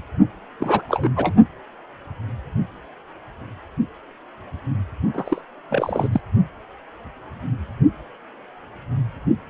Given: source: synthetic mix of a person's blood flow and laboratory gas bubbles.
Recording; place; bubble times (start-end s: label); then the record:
Doppler ultrasound of blood flow; precordium
0.59-0.82 s: bubbles
0.88-1.09 s: bubbles
1.16-1.33 s: bubbles
5.13-5.42 s: bubbles
5.69-6.08 s: bubbles
6.12-6.21 s: bubbles
From the record:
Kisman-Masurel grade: 222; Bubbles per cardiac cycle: several, 3 to 8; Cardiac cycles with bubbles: 10 to 50%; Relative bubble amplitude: moderate (0.250 to 0.450); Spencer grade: 2 (many but less than half of the cardiac periods contain bubble signals, singularly or in groups); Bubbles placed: only in the low amplitude regions of the cardiac cycle